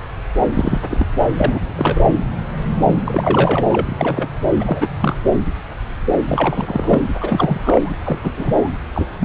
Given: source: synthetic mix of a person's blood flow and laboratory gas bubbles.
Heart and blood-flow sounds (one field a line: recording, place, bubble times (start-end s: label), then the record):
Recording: Doppler ultrasound of blood flow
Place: subclavian vein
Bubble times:
0.53-0.80 s: bubbles
0.91-1.05 s: bubbles
1.36-1.62 s: bubbles
1.76-2.01 s: bubbles
3.05-3.65 s: bubbles
3.70-4.29 s: bubbles
4.60-4.87 s: bubbles
5.00-5.16 s: bubbles
6.25-7.02 s: bubbles
7.21-7.96 s: bubbles
8.04-8.18 s: bubbles
8.22-8.34 s: bubbles
8.37-8.70 s: bubbles
8.94-9.06 s: bubbles
9.20-9.24 s: bubbles
From the record:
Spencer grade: 3 (all of the cardiac periods contain showers or single bubble signals, but not dominating or overriding the cardiac motion signals)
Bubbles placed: anywhere in the cardiac cycle